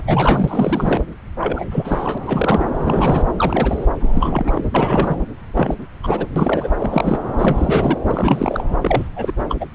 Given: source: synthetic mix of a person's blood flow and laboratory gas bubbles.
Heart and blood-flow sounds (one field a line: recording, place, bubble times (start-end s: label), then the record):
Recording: Doppler ultrasound of blood flow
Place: subclavian vein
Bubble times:
0.00-1.02 s: bubbles
1.40-1.67 s: bubbles
1.71-2.18 s: bubbles
2.26-2.65 s: bubbles
2.79-3.28 s: bubbles
3.36-3.86 s: bubbles
4.00-4.70 s: bubbles
4.74-5.18 s: bubbles
5.56-5.75 s: bubbles
6.03-6.27 s: bubbles
6.36-6.70 s: bubbles
6.78-7.20 s: bubbles
7.38-7.97 s: bubbles
8.07-8.63 s: bubbles
8.81-9.08 s: bubbles
9.16-9.33 s: bubbles
9.48-9.56 s: bubbles
9.60-9.66 s: bubbles
From the record:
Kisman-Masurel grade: 343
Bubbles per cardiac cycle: rolling drumbeat, 9 or more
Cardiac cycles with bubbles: 100%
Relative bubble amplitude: loud (0.450 to 0.775)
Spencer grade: 3 (all of the cardiac periods contain showers or single bubble signals, but not dominating or overriding the cardiac motion signals)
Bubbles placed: anywhere in the cardiac cycle